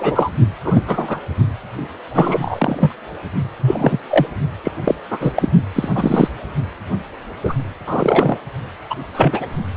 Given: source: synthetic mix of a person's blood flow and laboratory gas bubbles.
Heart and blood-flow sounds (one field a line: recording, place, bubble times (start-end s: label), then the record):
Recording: Doppler ultrasound of blood flow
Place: precordium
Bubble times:
0.00-0.30 s: bubbles
0.64-0.82 s: bubbles
0.87-1.20 s: bubbles
2.14-2.93 s: bubbles
3.61-3.99 s: bubbles
4.09-4.26 s: bubbles
4.64-4.72 s: bubbles
4.84-4.95 s: bubbles
5.10-5.32 s: bubbles
5.36-5.49 s: bubbles
5.75-5.88 s: bubbles
5.94-6.29 s: bubbles
7.43-7.54 s: bubbles
7.86-8.38 s: bubbles
8.89-8.95 s: bubbles
9.14-9.46 s: bubbles
From the record:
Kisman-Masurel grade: 243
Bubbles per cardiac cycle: several, 3 to 8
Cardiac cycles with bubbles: 100%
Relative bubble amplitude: loud (0.450 to 0.775)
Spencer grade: 3 (all of the cardiac periods contain showers or single bubble signals, but not dominating or overriding the cardiac motion signals)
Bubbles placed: only in the low amplitude regions of the cardiac cycle